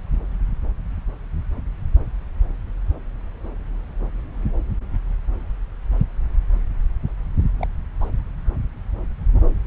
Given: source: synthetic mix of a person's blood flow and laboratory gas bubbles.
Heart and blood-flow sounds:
Doppler ultrasound of blood flow; subclavian vein
7.60-7.66 s: bubbles
8.00-8.09 s: bubbles
From the record:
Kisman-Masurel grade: 111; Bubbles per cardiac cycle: 1 to 2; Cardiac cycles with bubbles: 1 to 10%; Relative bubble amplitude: barely perceptible (0.100 to 0.250); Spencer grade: 1 (occasional bubble signal discernible with the cardiac motion signal, with majority of cardiac periods free of bubbles); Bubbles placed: anywhere in the cardiac cycle

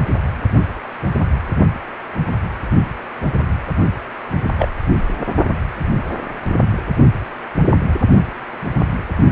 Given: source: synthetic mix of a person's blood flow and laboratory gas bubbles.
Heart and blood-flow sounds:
Doppler ultrasound of blood flow; precordium
4.58-4.67 s: bubbles
From the record:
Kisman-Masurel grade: 112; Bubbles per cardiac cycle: 1 to 2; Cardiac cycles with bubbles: 1 to 10%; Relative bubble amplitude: moderate (0.250 to 0.450); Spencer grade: 1 (occasional bubble signal discernible with the cardiac motion signal, with majority of cardiac periods free of bubbles); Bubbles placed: only in the low amplitude regions of the cardiac cycle

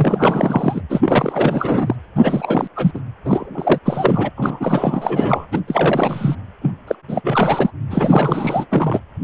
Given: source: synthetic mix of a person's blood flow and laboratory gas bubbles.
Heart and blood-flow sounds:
Doppler ultrasound of blood flow; precordium
0.00-0.81 s: bubbles
0.90-1.95 s: bubbles
2.15-2.67 s: bubbles
2.75-2.92 s: bubbles
2.94-3.00 s: bubbles
3.24-3.79 s: bubbles
3.84-4.30 s: bubbles
4.37-5.46 s: bubbles
5.51-5.61 s: bubbles
5.67-6.36 s: bubbles
6.62-6.72 s: bubbles
6.87-6.95 s: bubbles
7.08-7.71 s: bubbles
7.90-8.66 s: bubbles
8.70-9.00 s: bubbles
From the record:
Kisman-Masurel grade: 444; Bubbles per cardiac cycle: continuous sound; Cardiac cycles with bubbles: 100%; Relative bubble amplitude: maximal (0.775 to 0.999); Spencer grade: 4 (maximum detectable bubble signal sounding continuously throughout systole and diastole of every cardiac period, and overriding the amplitude of the normal cardiac signals); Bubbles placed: anywhere in the cardiac cycle

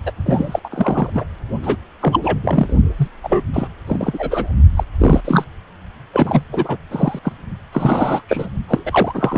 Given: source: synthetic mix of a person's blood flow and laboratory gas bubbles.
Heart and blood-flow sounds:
Doppler ultrasound of blood flow; precordium
0.06-0.12 s: bubbles
0.26-0.59 s: bubbles
0.64-1.10 s: bubbles
1.14-1.24 s: bubbles
1.62-1.76 s: bubbles
2.00-2.20 s: bubbles
2.23-2.38 s: bubbles
2.41-2.73 s: bubbles
2.97-3.08 s: bubbles
3.23-3.44 s: bubbles
3.53-3.67 s: bubbles
3.86-4.53 s: bubbles
4.75-4.83 s: bubbles
4.99-5.21 s: bubbles
5.25-5.45 s: bubbles
6.13-6.44 s: bubbles
6.53-6.77 s: bubbles
6.91-7.19 s: bubbles
7.23-7.33 s: bubbles
7.73-8.21 s: bubbles
8.29-8.48 s: bubbles
8.68-8.83 s: bubbles
8.86-9.38 s: bubbles
From the record:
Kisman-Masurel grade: 343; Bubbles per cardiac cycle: rolling drumbeat, 9 or more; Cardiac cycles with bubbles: 100%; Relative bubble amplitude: loud (0.450 to 0.775); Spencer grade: 3 (all of the cardiac periods contain showers or single bubble signals, but not dominating or overriding the cardiac motion signals); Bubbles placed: only in the low amplitude regions of the cardiac cycle

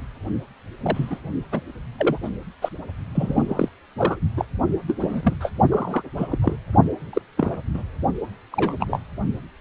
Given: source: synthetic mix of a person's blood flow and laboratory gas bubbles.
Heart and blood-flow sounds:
Doppler ultrasound of blood flow; precordium
0.83-1.18 s: bubbles
1.51-1.61 s: bubbles
1.98-2.19 s: bubbles
2.23-2.29 s: bubbles
2.61-2.69 s: bubbles
3.15-3.69 s: bubbles
3.98-4.20 s: bubbles
4.37-4.45 s: bubbles
4.88-4.96 s: bubbles
5.00-5.33 s: bubbles
5.40-5.51 s: bubbles
5.71-6.03 s: bubbles
6.17-6.28 s: bubbles
6.31-6.38 s: bubbles
6.42-6.56 s: bubbles
7.13-7.21 s: bubbles
7.37-7.58 s: bubbles
7.74-7.83 s: bubbles
8.52-8.75 s: bubbles
8.80-8.99 s: bubbles
From the record:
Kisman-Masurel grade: 242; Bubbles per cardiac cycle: several, 3 to 8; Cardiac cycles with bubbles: 100%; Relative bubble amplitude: moderate (0.250 to 0.450); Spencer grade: 3 (all of the cardiac periods contain showers or single bubble signals, but not dominating or overriding the cardiac motion signals); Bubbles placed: only in the low amplitude regions of the cardiac cycle

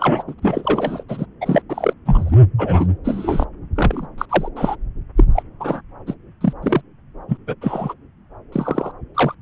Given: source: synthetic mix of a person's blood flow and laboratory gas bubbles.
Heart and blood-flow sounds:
Doppler ultrasound of blood flow; subclavian vein
0.00-0.23 s: bubbles
0.28-0.34 s: bubbles
0.42-1.03 s: bubbles
1.08-1.25 s: bubbles
1.41-1.62 s: bubbles
1.70-1.94 s: bubbles
2.05-2.40 s: bubbles
2.58-2.88 s: bubbles
3.04-3.45 s: bubbles
3.76-4.06 s: bubbles
4.18-4.26 s: bubbles
4.29-4.48 s: bubbles
4.56-4.76 s: bubbles
5.16-5.24 s: bubbles
5.35-5.43 s: bubbles
5.60-5.81 s: bubbles
6.06-6.14 s: bubbles
6.40-6.53 s: bubbles
6.62-6.81 s: bubbles
7.28-7.38 s: bubbles
7.47-7.55 s: bubbles
7.61-7.94 s: bubbles
8.52-8.92 s: bubbles
9.14-9.35 s: bubbles
From the record:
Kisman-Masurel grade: 243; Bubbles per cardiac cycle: several, 3 to 8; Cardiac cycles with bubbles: 100%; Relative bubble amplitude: loud (0.450 to 0.775); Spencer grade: 3 (all of the cardiac periods contain showers or single bubble signals, but not dominating or overriding the cardiac motion signals); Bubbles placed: anywhere in the cardiac cycle

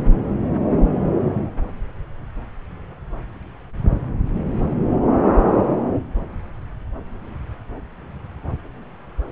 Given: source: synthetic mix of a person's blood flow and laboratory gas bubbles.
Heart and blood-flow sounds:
Doppler ultrasound of blood flow; subclavian vein
no bubbles
From the record:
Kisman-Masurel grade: 000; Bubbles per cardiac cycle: 0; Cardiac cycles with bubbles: 0%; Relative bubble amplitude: no bubbles discernible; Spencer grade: 0 (complete lack of bubble signals)

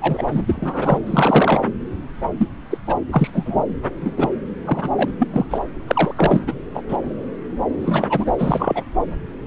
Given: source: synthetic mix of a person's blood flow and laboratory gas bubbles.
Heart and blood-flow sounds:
Doppler ultrasound of blood flow; subclavian vein
0.00-0.23 s: bubbles
0.26-0.43 s: bubbles
0.46-0.98 s: bubbles
1.06-1.61 s: bubbles
2.37-2.48 s: bubbles
2.71-2.77 s: bubbles
2.86-2.94 s: bubbles
3.10-3.30 s: bubbles
3.32-3.63 s: bubbles
4.01-4.14 s: bubbles
4.17-4.29 s: bubbles
4.65-4.90 s: bubbles
4.96-5.10 s: bubbles
5.19-5.46 s: bubbles
5.50-5.60 s: bubbles
5.87-6.41 s: bubbles
6.46-6.54 s: bubbles
6.74-6.83 s: bubbles
6.88-6.97 s: bubbles
7.78-8.31 s: bubbles
8.38-8.84 s: bubbles
From the record:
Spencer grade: 3 (all of the cardiac periods contain showers or single bubble signals, but not dominating or overriding the cardiac motion signals); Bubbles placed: anywhere in the cardiac cycle

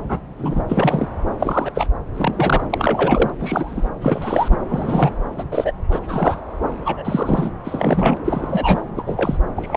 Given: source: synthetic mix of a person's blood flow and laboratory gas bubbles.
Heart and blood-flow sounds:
Doppler ultrasound of blood flow; subclavian vein
0.08-0.19 s: bubbles
0.38-0.63 s: bubbles
0.68-1.08 s: bubbles
1.40-1.71 s: bubbles
1.74-1.89 s: bubbles
2.15-2.64 s: bubbles
2.70-3.30 s: bubbles
3.40-3.90 s: bubbles
4.01-4.57 s: bubbles
4.70-5.11 s: bubbles
5.38-5.44 s: bubbles
5.52-5.73 s: bubbles
5.91-6.00 s: bubbles
6.06-6.40 s: bubbles
6.85-7.51 s: bubbles
7.65-8.19 s: bubbles
8.25-8.82 s: bubbles
8.96-9.03 s: bubbles
9.06-9.38 s: bubbles
9.56-9.77 s: bubbles
From the record:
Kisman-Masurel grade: 242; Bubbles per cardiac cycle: several, 3 to 8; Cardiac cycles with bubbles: 100%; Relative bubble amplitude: moderate (0.250 to 0.450); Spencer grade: 3 (all of the cardiac periods contain showers or single bubble signals, but not dominating or overriding the cardiac motion signals); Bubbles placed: anywhere in the cardiac cycle

